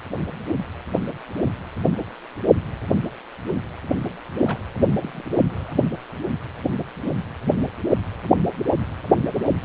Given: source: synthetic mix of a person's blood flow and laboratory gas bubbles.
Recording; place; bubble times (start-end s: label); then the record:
Doppler ultrasound of blood flow; precordium
4.44-4.58 s: bubbles
5.00-5.22 s: bubbles
5.50-5.76 s: bubbles
5.92-5.96 s: bubbles
From the record:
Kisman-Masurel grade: 221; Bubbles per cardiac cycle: several, 3 to 8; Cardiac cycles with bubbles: 10 to 50%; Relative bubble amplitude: barely perceptible (0.100 to 0.250); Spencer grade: 2 (many but less than half of the cardiac periods contain bubble signals, singularly or in groups); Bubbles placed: anywhere in the cardiac cycle